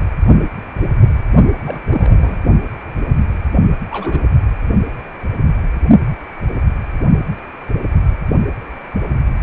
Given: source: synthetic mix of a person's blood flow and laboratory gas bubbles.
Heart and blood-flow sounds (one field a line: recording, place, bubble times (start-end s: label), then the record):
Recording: Doppler ultrasound of blood flow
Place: precordium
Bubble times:
1.53-1.79 s: bubbles
1.83-2.38 s: bubbles
3.90-4.21 s: bubbles
From the record:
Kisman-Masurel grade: 221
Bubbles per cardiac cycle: several, 3 to 8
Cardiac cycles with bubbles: 10 to 50%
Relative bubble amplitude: barely perceptible (0.100 to 0.250)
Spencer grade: 2 (many but less than half of the cardiac periods contain bubble signals, singularly or in groups)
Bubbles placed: only in the low amplitude regions of the cardiac cycle